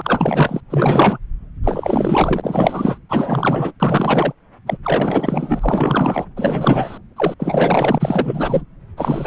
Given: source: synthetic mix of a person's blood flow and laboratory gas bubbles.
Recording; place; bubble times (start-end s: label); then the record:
Doppler ultrasound of blood flow; subclavian vein
0.00-0.60 s: bubbles
0.70-1.19 s: bubbles
1.64-2.98 s: bubbles
3.09-3.73 s: bubbles
3.80-4.33 s: bubbles
4.67-4.78 s: bubbles
4.83-6.26 s: bubbles
6.36-6.98 s: bubbles
7.16-7.34 s: bubbles
7.39-8.63 s: bubbles
8.96-9.27 s: bubbles
From the record:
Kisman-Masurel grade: 444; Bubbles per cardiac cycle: continuous sound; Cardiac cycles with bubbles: 100%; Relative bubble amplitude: maximal (0.775 to 0.999); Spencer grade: 4 (maximum detectable bubble signal sounding continuously throughout systole and diastole of every cardiac period, and overriding the amplitude of the normal cardiac signals); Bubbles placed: anywhere in the cardiac cycle